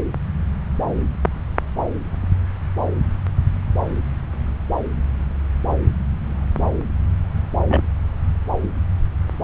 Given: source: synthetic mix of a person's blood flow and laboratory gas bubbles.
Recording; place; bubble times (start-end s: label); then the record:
Doppler ultrasound of blood flow; subclavian vein
7.68-7.81 s: bubbles
From the record:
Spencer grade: 2 (many but less than half of the cardiac periods contain bubble signals, singularly or in groups); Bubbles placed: anywhere in the cardiac cycle